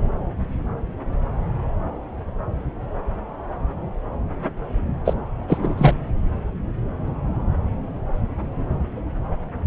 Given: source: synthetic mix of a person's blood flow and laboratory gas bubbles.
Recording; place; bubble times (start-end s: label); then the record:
Doppler ultrasound of blood flow; subclavian vein
5.04-5.13 s: bubbles
5.47-5.93 s: bubbles
From the record:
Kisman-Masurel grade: 213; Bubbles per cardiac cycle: several, 3 to 8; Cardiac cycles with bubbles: 1 to 10%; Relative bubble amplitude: loud (0.450 to 0.775); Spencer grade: 1 (occasional bubble signal discernible with the cardiac motion signal, with majority of cardiac periods free of bubbles); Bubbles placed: anywhere in the cardiac cycle